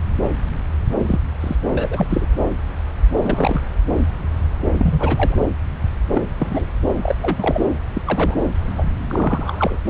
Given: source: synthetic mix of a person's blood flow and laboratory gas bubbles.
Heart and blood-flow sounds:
Doppler ultrasound of blood flow; subclavian vein
0.98-1.20 s: bubbles
1.40-1.56 s: bubbles
1.75-2.07 s: bubbles
2.09-2.27 s: bubbles
3.16-3.62 s: bubbles
4.73-5.38 s: bubbles
6.15-6.21 s: bubbles
6.38-6.65 s: bubbles
7.02-7.15 s: bubbles
7.21-7.62 s: bubbles
7.93-8.02 s: bubbles
8.05-8.37 s: bubbles
8.77-8.86 s: bubbles
9.09-9.79 s: bubbles
From the record:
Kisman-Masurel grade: 232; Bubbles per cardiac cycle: several, 3 to 8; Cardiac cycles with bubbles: 50 to 99%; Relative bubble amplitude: moderate (0.250 to 0.450); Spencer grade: 3 (all of the cardiac periods contain showers or single bubble signals, but not dominating or overriding the cardiac motion signals); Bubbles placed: anywhere in the cardiac cycle

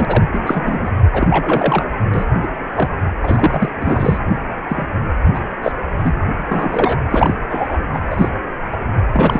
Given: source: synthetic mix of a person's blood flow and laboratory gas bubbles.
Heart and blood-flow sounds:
Doppler ultrasound of blood flow; precordium
0.00-0.05 s: bubbles
0.08-0.23 s: bubbles
0.32-0.91 s: bubbles
1.12-1.86 s: bubbles
2.13-2.25 s: bubbles
2.42-2.48 s: bubbles
2.75-2.89 s: bubbles
3.23-3.72 s: bubbles
3.79-4.18 s: bubbles
4.69-4.87 s: bubbles
5.34-5.40 s: bubbles
5.62-5.72 s: bubbles
5.98-6.14 s: bubbles
6.51-6.97 s: bubbles
7.10-7.34 s: bubbles
7.48-7.77 s: bubbles
7.93-8.00 s: bubbles
8.11-8.29 s: bubbles
8.72-8.77 s: bubbles
9.12-9.39 s: bubbles
From the record:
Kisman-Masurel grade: 243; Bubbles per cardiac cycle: several, 3 to 8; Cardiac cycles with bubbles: 100%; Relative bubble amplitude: loud (0.450 to 0.775); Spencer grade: 3 (all of the cardiac periods contain showers or single bubble signals, but not dominating or overriding the cardiac motion signals); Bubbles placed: anywhere in the cardiac cycle

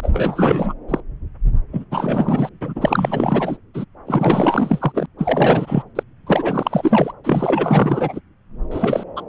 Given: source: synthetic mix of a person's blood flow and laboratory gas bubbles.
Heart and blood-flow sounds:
Doppler ultrasound of blood flow; subclavian vein
0.00-0.73 s: bubbles
0.88-1.00 s: bubbles
1.73-1.85 s: bubbles
1.91-2.49 s: bubbles
2.61-3.57 s: bubbles
3.74-3.85 s: bubbles
4.07-5.06 s: bubbles
5.18-5.83 s: bubbles
5.95-6.03 s: bubbles
6.26-7.12 s: bubbles
7.24-8.20 s: bubbles
8.71-9.03 s: bubbles
9.16-9.23 s: bubbles
From the record:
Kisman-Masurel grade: 444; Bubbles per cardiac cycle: continuous sound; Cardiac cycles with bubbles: 100%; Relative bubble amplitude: maximal (0.775 to 0.999); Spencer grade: 4 (maximum detectable bubble signal sounding continuously throughout systole and diastole of every cardiac period, and overriding the amplitude of the normal cardiac signals); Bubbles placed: anywhere in the cardiac cycle

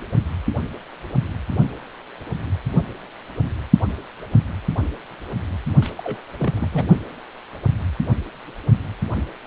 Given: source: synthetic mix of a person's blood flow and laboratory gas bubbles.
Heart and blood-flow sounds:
Doppler ultrasound of blood flow; precordium
5.82-5.90 s: bubbles
5.98-6.21 s: bubbles
6.38-6.68 s: bubbles
6.72-6.86 s: bubbles
From the record:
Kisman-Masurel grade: 211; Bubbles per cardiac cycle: several, 3 to 8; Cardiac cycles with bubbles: 1 to 10%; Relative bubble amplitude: barely perceptible (0.100 to 0.250); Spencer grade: 1 (occasional bubble signal discernible with the cardiac motion signal, with majority of cardiac periods free of bubbles); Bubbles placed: only in the low amplitude regions of the cardiac cycle

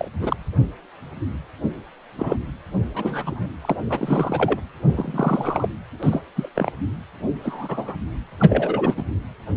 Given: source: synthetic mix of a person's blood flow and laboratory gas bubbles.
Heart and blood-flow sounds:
Doppler ultrasound of blood flow; precordium
0.00-0.08 s: bubbles
0.20-0.36 s: bubbles
2.18-2.37 s: bubbles
2.94-3.47 s: bubbles
3.62-3.75 s: bubbles
3.89-4.56 s: bubbles
4.88-5.68 s: bubbles
6.02-6.22 s: bubbles
6.35-6.50 s: bubbles
6.55-6.71 s: bubbles
7.43-7.96 s: bubbles
8.39-8.94 s: bubbles
8.96-9.04 s: bubbles
From the record:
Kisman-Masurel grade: 232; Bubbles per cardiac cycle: several, 3 to 8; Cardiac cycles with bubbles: 50 to 99%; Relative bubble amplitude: moderate (0.250 to 0.450); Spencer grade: 3 (all of the cardiac periods contain showers or single bubble signals, but not dominating or overriding the cardiac motion signals); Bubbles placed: anywhere in the cardiac cycle

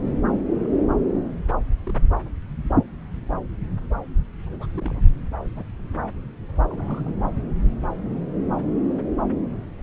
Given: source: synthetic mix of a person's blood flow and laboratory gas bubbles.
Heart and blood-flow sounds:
Doppler ultrasound of blood flow; subclavian vein
0.57-0.70 s: bubbles
1.86-2.10 s: bubbles
4.46-4.67 s: bubbles
4.77-5.01 s: bubbles
5.56-5.66 s: bubbles
6.70-7.12 s: bubbles
From the record:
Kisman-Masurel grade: 121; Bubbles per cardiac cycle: 1 to 2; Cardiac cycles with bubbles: 10 to 50%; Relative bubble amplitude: barely perceptible (0.100 to 0.250); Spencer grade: 2 (many but less than half of the cardiac periods contain bubble signals, singularly or in groups); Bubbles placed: anywhere in the cardiac cycle

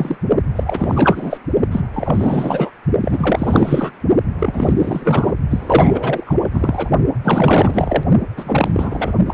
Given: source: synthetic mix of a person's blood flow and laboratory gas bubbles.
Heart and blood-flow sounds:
Doppler ultrasound of blood flow; precordium
0.00-0.17 s: bubbles
0.55-1.39 s: bubbles
1.72-1.87 s: bubbles
1.93-2.71 s: bubbles
3.02-3.93 s: bubbles
4.38-5.33 s: bubbles
5.50-6.35 s: bubbles
6.42-6.90 s: bubbles
7.23-8.05 s: bubbles
8.36-9.13 s: bubbles
9.27-9.34 s: bubbles
From the record:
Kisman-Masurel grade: 444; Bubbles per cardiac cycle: continuous sound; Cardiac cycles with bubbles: 100%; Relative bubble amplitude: maximal (0.775 to 0.999); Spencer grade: 4 (maximum detectable bubble signal sounding continuously throughout systole and diastole of every cardiac period, and overriding the amplitude of the normal cardiac signals); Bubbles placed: only in the low amplitude regions of the cardiac cycle

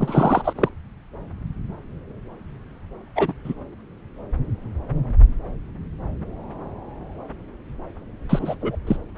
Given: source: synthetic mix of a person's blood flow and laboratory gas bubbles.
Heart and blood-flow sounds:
Doppler ultrasound of blood flow; subclavian vein
0.00-0.69 s: bubbles
3.15-3.33 s: bubbles
3.44-3.54 s: bubbles
8.29-8.55 s: bubbles
8.62-8.76 s: bubbles
8.87-8.96 s: bubbles
From the record:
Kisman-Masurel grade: 223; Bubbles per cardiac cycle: several, 3 to 8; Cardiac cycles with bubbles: 10 to 50%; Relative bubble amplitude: loud (0.450 to 0.775); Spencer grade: 2 (many but less than half of the cardiac periods contain bubble signals, singularly or in groups); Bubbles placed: anywhere in the cardiac cycle

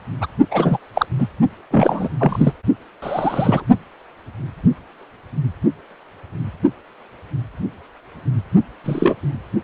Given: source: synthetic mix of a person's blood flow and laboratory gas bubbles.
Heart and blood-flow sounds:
Doppler ultrasound of blood flow; precordium
0.20-0.27 s: bubbles
0.51-0.77 s: bubbles
0.93-1.06 s: bubbles
1.18-1.27 s: bubbles
1.70-2.08 s: bubbles
2.19-2.54 s: bubbles
3.02-3.63 s: bubbles
8.84-9.15 s: bubbles
From the record:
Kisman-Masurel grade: 233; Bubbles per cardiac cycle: several, 3 to 8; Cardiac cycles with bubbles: 50 to 99%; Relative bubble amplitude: loud (0.450 to 0.775); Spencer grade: 3 (all of the cardiac periods contain showers or single bubble signals, but not dominating or overriding the cardiac motion signals); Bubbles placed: only in the low amplitude regions of the cardiac cycle

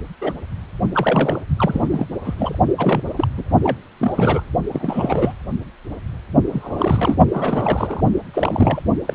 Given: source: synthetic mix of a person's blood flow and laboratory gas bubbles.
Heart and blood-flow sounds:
Doppler ultrasound of blood flow; precordium
0.21-0.33 s: bubbles
0.93-1.40 s: bubbles
1.57-2.07 s: bubbles
2.23-2.58 s: bubbles
2.78-3.10 s: bubbles
3.17-3.27 s: bubbles
3.37-3.43 s: bubbles
3.63-3.77 s: bubbles
4.00-4.45 s: bubbles
4.71-5.33 s: bubbles
6.50-7.17 s: bubbles
7.33-8.01 s: bubbles
8.34-8.83 s: bubbles
9.08-9.15 s: bubbles
From the record:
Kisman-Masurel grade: 332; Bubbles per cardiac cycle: rolling drumbeat, 9 or more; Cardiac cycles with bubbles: 50 to 99%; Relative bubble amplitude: moderate (0.250 to 0.450); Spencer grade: 3 (all of the cardiac periods contain showers or single bubble signals, but not dominating or overriding the cardiac motion signals); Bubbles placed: only in the low amplitude regions of the cardiac cycle

